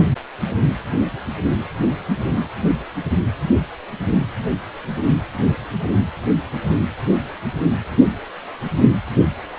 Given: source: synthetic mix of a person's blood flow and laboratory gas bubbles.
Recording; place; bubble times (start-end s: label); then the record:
Doppler ultrasound of blood flow; precordium
no bubbles
From the record:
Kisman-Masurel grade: 000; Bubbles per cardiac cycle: 0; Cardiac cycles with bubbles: 0%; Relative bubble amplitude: no bubbles discernible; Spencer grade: 0 (complete lack of bubble signals)